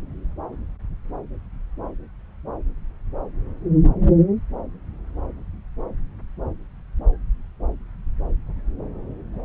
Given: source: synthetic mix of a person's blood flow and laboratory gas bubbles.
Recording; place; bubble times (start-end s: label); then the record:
Doppler ultrasound of blood flow; subclavian vein
9.33-9.41 s: bubbles
From the record:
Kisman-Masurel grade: 221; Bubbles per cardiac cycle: several, 3 to 8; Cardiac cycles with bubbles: 10 to 50%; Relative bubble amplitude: barely perceptible (0.100 to 0.250); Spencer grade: 2 (many but less than half of the cardiac periods contain bubble signals, singularly or in groups); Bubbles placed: anywhere in the cardiac cycle